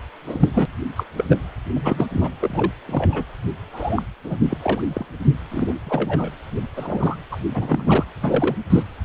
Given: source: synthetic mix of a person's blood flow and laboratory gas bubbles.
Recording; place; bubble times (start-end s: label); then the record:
Doppler ultrasound of blood flow; precordium
0.26-0.48 s: bubbles
0.53-0.66 s: bubbles
0.96-1.04 s: bubbles
1.17-1.24 s: bubbles
1.29-1.37 s: bubbles
1.75-2.07 s: bubbles
2.11-2.31 s: bubbles
2.41-2.71 s: bubbles
2.85-3.25 s: bubbles
3.72-4.03 s: bubbles
4.24-4.37 s: bubbles
4.50-4.58 s: bubbles
4.62-4.80 s: bubbles
4.88-5.05 s: bubbles
5.20-5.29 s: bubbles
5.50-5.74 s: bubbles
5.84-6.31 s: bubbles
6.75-7.17 s: bubbles
7.31-7.38 s: bubbles
7.54-8.04 s: bubbles
8.22-8.55 s: bubbles
8.70-8.83 s: bubbles
From the record:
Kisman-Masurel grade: 242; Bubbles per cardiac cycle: several, 3 to 8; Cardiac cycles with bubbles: 100%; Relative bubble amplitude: moderate (0.250 to 0.450); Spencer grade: 3 (all of the cardiac periods contain showers or single bubble signals, but not dominating or overriding the cardiac motion signals); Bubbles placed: anywhere in the cardiac cycle